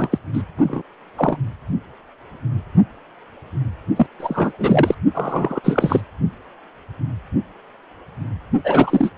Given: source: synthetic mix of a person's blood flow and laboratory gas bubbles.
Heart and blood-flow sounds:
Doppler ultrasound of blood flow; precordium
0.00-0.19 s: bubbles
0.33-0.43 s: bubbles
0.57-0.82 s: bubbles
1.17-1.37 s: bubbles
3.96-4.07 s: bubbles
4.19-4.52 s: bubbles
4.58-4.95 s: bubbles
5.15-5.61 s: bubbles
5.64-6.02 s: bubbles
8.64-9.10 s: bubbles
From the record:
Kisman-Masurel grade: 333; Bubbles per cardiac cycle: rolling drumbeat, 9 or more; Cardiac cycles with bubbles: 50 to 99%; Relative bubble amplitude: loud (0.450 to 0.775); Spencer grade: 3 (all of the cardiac periods contain showers or single bubble signals, but not dominating or overriding the cardiac motion signals); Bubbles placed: only in the low amplitude regions of the cardiac cycle

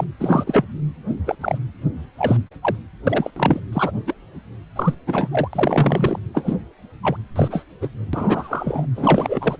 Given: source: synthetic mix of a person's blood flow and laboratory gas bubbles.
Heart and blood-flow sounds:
Doppler ultrasound of blood flow; precordium
0.00-0.05 s: bubbles
0.20-0.44 s: bubbles
0.46-0.65 s: bubbles
1.27-1.35 s: bubbles
1.41-1.58 s: bubbles
2.18-2.37 s: bubbles
2.62-2.75 s: bubbles
3.07-3.31 s: bubbles
3.36-3.60 s: bubbles
3.72-3.91 s: bubbles
4.07-4.14 s: bubbles
4.75-4.94 s: bubbles
5.07-5.28 s: bubbles
5.31-5.48 s: bubbles
5.53-6.19 s: bubbles
6.34-6.56 s: bubbles
7.02-7.17 s: bubbles
7.35-7.64 s: bubbles
7.81-7.88 s: bubbles
8.13-8.86 s: bubbles
8.95-9.56 s: bubbles
From the record:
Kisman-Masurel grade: 242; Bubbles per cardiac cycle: several, 3 to 8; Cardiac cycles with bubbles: 100%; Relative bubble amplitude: moderate (0.250 to 0.450); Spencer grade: 3 (all of the cardiac periods contain showers or single bubble signals, but not dominating or overriding the cardiac motion signals); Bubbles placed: anywhere in the cardiac cycle

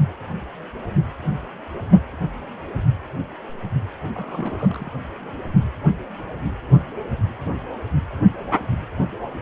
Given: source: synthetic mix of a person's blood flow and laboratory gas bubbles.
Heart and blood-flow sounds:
Doppler ultrasound of blood flow; precordium
4.04-4.08 s: bubbles
4.13-4.90 s: bubbles
From the record:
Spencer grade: 1 (occasional bubble signal discernible with the cardiac motion signal, with majority of cardiac periods free of bubbles); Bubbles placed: anywhere in the cardiac cycle

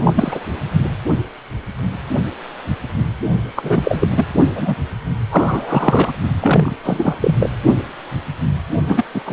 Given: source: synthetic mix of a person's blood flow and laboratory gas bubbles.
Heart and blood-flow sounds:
Doppler ultrasound of blood flow; precordium
0.03-0.47 s: bubbles
3.55-4.08 s: bubbles
4.16-4.25 s: bubbles
4.55-4.75 s: bubbles
5.30-6.12 s: bubbles
6.41-6.75 s: bubbles
6.83-7.36 s: bubbles
7.40-7.50 s: bubbles
8.86-9.04 s: bubbles
9.14-9.21 s: bubbles
9.25-9.33 s: bubbles
From the record:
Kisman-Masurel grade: 333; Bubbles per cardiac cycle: rolling drumbeat, 9 or more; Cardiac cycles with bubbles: 50 to 99%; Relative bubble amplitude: loud (0.450 to 0.775); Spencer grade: 3 (all of the cardiac periods contain showers or single bubble signals, but not dominating or overriding the cardiac motion signals); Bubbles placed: only in the low amplitude regions of the cardiac cycle

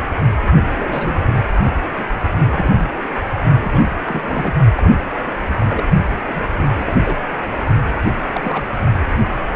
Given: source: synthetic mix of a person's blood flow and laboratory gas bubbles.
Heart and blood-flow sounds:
Doppler ultrasound of blood flow; precordium
0.76-1.27 s: bubbles
1.97-2.05 s: bubbles
2.50-2.86 s: bubbles
3.61-3.82 s: bubbles
4.04-4.54 s: bubbles
4.75-4.92 s: bubbles
5.13-5.21 s: bubbles
5.27-5.32 s: bubbles
5.58-5.66 s: bubbles
5.69-5.84 s: bubbles
6.28-6.96 s: bubbles
7.03-7.18 s: bubbles
8.33-8.63 s: bubbles
From the record:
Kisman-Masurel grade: 232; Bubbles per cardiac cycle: several, 3 to 8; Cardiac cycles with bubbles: 50 to 99%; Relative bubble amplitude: moderate (0.250 to 0.450); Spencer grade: 3 (all of the cardiac periods contain showers or single bubble signals, but not dominating or overriding the cardiac motion signals); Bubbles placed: only in the low amplitude regions of the cardiac cycle

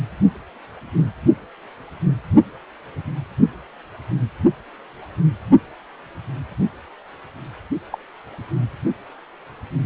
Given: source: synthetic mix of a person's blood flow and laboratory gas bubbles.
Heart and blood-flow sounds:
Doppler ultrasound of blood flow; precordium
7.92-7.97 s: bubbles
From the record:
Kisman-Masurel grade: 112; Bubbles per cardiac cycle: 1 to 2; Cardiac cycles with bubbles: 1 to 10%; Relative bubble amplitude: moderate (0.250 to 0.450); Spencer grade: 1 (occasional bubble signal discernible with the cardiac motion signal, with majority of cardiac periods free of bubbles); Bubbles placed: anywhere in the cardiac cycle

